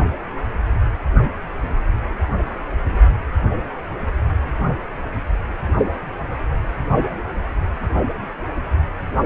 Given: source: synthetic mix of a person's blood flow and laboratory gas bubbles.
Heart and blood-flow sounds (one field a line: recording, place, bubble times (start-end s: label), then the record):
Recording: Doppler ultrasound of blood flow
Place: precordium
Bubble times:
no bubbles
From the record:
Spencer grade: 0 (complete lack of bubble signals)